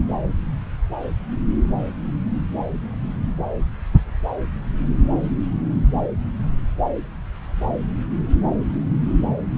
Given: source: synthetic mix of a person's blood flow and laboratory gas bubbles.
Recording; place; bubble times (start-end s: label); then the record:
Doppler ultrasound of blood flow; subclavian vein
no bubbles
From the record:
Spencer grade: 0 (complete lack of bubble signals)